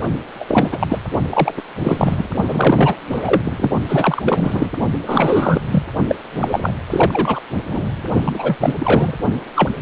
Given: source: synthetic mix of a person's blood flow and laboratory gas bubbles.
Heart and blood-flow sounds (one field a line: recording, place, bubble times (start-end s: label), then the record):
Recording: Doppler ultrasound of blood flow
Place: precordium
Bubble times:
0.39-0.45 s: bubbles
0.48-0.98 s: bubbles
1.29-1.54 s: bubbles
1.56-1.62 s: bubbles
1.82-2.27 s: bubbles
2.48-2.96 s: bubbles
3.09-3.71 s: bubbles
3.88-4.22 s: bubbles
4.25-4.70 s: bubbles
5.06-5.61 s: bubbles
5.71-5.83 s: bubbles
6.07-6.16 s: bubbles
6.33-6.72 s: bubbles
6.90-7.40 s: bubbles
7.67-8.10 s: bubbles
8.24-8.56 s: bubbles
8.60-8.74 s: bubbles
8.79-9.13 s: bubbles
9.55-9.70 s: bubbles
From the record:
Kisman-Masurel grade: 343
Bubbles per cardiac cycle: rolling drumbeat, 9 or more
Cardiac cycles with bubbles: 100%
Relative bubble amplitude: loud (0.450 to 0.775)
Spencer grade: 3 (all of the cardiac periods contain showers or single bubble signals, but not dominating or overriding the cardiac motion signals)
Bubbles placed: only in the low amplitude regions of the cardiac cycle